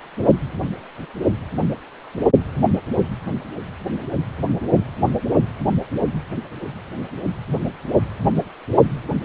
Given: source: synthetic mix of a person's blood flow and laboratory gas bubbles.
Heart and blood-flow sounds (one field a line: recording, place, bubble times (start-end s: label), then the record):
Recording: Doppler ultrasound of blood flow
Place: precordium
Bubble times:
no bubbles
From the record:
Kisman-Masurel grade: 000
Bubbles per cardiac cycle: 0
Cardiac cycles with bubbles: 0%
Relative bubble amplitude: no bubbles discernible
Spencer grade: 0 (complete lack of bubble signals)